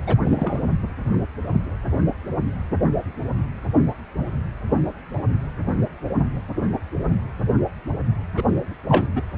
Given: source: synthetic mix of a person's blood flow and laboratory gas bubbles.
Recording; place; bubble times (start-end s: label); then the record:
Doppler ultrasound of blood flow; precordium
0.06-0.15 s: bubbles
0.19-0.66 s: bubbles
8.37-8.43 s: bubbles
8.88-9.08 s: bubbles
9.15-9.22 s: bubbles
From the record:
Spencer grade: 2 (many but less than half of the cardiac periods contain bubble signals, singularly or in groups); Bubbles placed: anywhere in the cardiac cycle